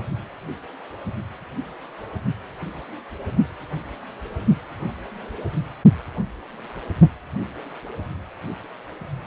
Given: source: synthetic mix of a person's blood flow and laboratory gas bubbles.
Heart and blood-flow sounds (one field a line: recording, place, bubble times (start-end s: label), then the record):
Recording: Doppler ultrasound of blood flow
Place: precordium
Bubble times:
no bubbles
From the record:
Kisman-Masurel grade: 000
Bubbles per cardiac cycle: 0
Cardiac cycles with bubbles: 0%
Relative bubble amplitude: no bubbles discernible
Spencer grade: 0 (complete lack of bubble signals)